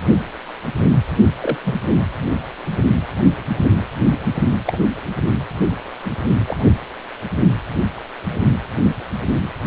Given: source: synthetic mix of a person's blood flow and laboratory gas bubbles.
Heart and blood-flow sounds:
Doppler ultrasound of blood flow; precordium
1.41-1.57 s: bubbles
1.64-1.76 s: bubbles
4.67-4.80 s: bubbles
6.03-6.12 s: bubbles
6.47-6.77 s: bubbles
From the record:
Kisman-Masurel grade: 122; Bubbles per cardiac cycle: 1 to 2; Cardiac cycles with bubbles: 10 to 50%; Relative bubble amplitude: moderate (0.250 to 0.450); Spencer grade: 2 (many but less than half of the cardiac periods contain bubble signals, singularly or in groups); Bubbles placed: only in the low amplitude regions of the cardiac cycle

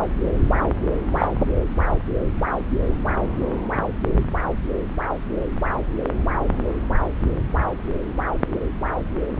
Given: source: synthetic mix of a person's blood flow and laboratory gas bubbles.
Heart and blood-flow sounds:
Doppler ultrasound of blood flow; subclavian vein
1.15-1.27 s: bubbles
From the record:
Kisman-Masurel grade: 112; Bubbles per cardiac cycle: 1 to 2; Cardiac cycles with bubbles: 1 to 10%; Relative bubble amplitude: moderate (0.250 to 0.450); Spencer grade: 1 (occasional bubble signal discernible with the cardiac motion signal, with majority of cardiac periods free of bubbles); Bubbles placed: anywhere in the cardiac cycle

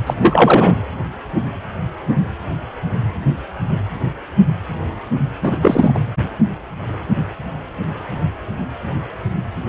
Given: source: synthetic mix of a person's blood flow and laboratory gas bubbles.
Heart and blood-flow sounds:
Doppler ultrasound of blood flow; precordium
0.06-0.14 s: bubbles
0.21-0.82 s: bubbles
5.42-5.92 s: bubbles
5.94-5.99 s: bubbles
From the record:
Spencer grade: 2 (many but less than half of the cardiac periods contain bubble signals, singularly or in groups); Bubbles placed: anywhere in the cardiac cycle

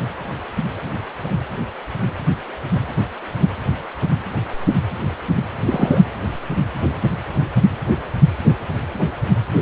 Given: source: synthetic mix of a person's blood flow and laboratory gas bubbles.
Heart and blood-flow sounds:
Doppler ultrasound of blood flow; precordium
5.66-6.02 s: bubbles
From the record:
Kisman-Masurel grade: 113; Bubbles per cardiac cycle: 1 to 2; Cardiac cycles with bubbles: 1 to 10%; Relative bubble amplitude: loud (0.450 to 0.775); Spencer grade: 1 (occasional bubble signal discernible with the cardiac motion signal, with majority of cardiac periods free of bubbles); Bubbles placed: anywhere in the cardiac cycle

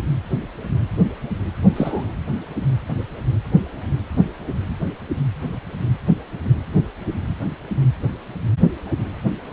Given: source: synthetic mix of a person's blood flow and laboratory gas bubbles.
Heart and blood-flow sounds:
Doppler ultrasound of blood flow; precordium
1.76-2.06 s: bubbles
From the record:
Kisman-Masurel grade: 112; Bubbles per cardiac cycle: 1 to 2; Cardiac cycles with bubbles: 1 to 10%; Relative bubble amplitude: moderate (0.250 to 0.450); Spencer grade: 1 (occasional bubble signal discernible with the cardiac motion signal, with majority of cardiac periods free of bubbles); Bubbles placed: anywhere in the cardiac cycle

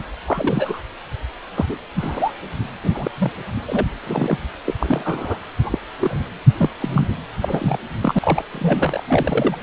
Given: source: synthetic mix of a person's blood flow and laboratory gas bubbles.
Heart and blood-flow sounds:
Doppler ultrasound of blood flow; precordium
0.13-0.15 s: bubbles
0.27-0.81 s: bubbles
1.54-1.77 s: bubbles
1.98-2.33 s: bubbles
2.83-3.11 s: bubbles
3.18-3.32 s: bubbles
3.66-3.85 s: bubbles
4.05-4.38 s: bubbles
4.66-4.74 s: bubbles
4.79-5.38 s: bubbles
5.63-5.79 s: bubbles
6.00-6.26 s: bubbles
6.58-6.74 s: bubbles
6.80-7.07 s: bubbles
7.41-7.78 s: bubbles
8.02-8.44 s: bubbles
8.53-9.03 s: bubbles
9.05-9.56 s: bubbles
From the record:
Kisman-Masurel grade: 242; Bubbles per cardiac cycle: several, 3 to 8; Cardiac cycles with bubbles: 100%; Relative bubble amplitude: moderate (0.250 to 0.450); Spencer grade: 3 (all of the cardiac periods contain showers or single bubble signals, but not dominating or overriding the cardiac motion signals); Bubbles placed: anywhere in the cardiac cycle

